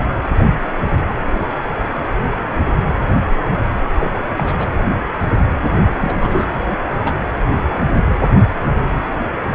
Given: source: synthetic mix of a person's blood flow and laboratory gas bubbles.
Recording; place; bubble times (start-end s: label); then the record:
Doppler ultrasound of blood flow; precordium
0.00-0.07 s: bubbles
3.99-4.24 s: bubbles
4.37-4.56 s: bubbles
4.60-4.67 s: bubbles
6.00-6.46 s: bubbles
6.52-6.66 s: bubbles
7.05-7.17 s: bubbles
From the record:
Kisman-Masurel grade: 222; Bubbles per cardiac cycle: several, 3 to 8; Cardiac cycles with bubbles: 10 to 50%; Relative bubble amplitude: moderate (0.250 to 0.450); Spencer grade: 2 (many but less than half of the cardiac periods contain bubble signals, singularly or in groups); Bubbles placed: anywhere in the cardiac cycle